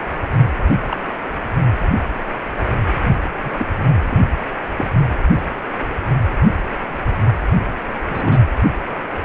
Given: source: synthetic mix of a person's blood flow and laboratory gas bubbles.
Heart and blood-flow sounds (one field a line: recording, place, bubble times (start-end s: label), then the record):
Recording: Doppler ultrasound of blood flow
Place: precordium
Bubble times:
0.86-0.97 s: bubbles
3.42-3.69 s: bubbles
4.09-4.22 s: bubbles
4.78-4.91 s: bubbles
8.06-8.42 s: bubbles
From the record:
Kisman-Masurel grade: 122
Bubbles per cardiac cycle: 1 to 2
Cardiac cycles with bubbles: 10 to 50%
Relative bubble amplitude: moderate (0.250 to 0.450)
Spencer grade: 2 (many but less than half of the cardiac periods contain bubble signals, singularly or in groups)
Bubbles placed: anywhere in the cardiac cycle